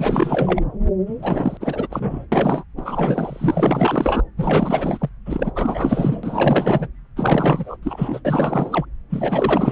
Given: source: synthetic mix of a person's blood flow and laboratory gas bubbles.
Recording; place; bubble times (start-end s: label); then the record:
Doppler ultrasound of blood flow; subclavian vein
0.00-0.61 s: bubbles
1.06-1.57 s: bubbles
1.60-2.25 s: bubbles
2.31-2.63 s: bubbles
2.77-4.22 s: bubbles
4.37-5.10 s: bubbles
5.25-5.52 s: bubbles
5.55-6.88 s: bubbles
7.16-7.77 s: bubbles
7.83-8.21 s: bubbles
8.24-8.85 s: bubbles
9.09-9.72 s: bubbles
From the record:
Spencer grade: 4 (maximum detectable bubble signal sounding continuously throughout systole and diastole of every cardiac period, and overriding the amplitude of the normal cardiac signals); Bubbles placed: anywhere in the cardiac cycle